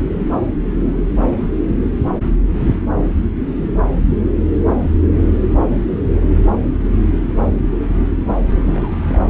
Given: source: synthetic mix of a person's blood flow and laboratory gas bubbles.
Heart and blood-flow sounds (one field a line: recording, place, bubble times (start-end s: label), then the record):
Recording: Doppler ultrasound of blood flow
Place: subclavian vein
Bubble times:
8.46-9.30 s: bubbles
From the record:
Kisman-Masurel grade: 211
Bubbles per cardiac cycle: several, 3 to 8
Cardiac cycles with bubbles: 1 to 10%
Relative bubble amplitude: barely perceptible (0.100 to 0.250)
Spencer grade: 1 (occasional bubble signal discernible with the cardiac motion signal, with majority of cardiac periods free of bubbles)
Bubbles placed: anywhere in the cardiac cycle